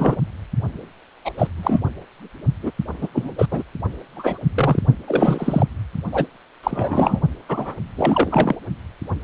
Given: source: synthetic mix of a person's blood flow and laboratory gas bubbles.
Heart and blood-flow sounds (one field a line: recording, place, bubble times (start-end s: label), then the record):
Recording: Doppler ultrasound of blood flow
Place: precordium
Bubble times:
0.00-0.23 s: bubbles
1.25-1.31 s: bubbles
1.38-1.47 s: bubbles
1.57-1.80 s: bubbles
2.62-2.71 s: bubbles
3.00-3.08 s: bubbles
3.13-3.35 s: bubbles
3.38-3.46 s: bubbles
3.50-3.64 s: bubbles
4.16-4.38 s: bubbles
4.54-4.83 s: bubbles
5.08-5.67 s: bubbles
6.11-6.26 s: bubbles
6.63-7.20 s: bubbles
7.49-7.76 s: bubbles
7.96-8.55 s: bubbles
From the record:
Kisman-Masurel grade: 243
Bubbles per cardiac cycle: several, 3 to 8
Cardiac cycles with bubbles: 100%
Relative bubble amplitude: loud (0.450 to 0.775)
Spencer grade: 3 (all of the cardiac periods contain showers or single bubble signals, but not dominating or overriding the cardiac motion signals)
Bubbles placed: only in the low amplitude regions of the cardiac cycle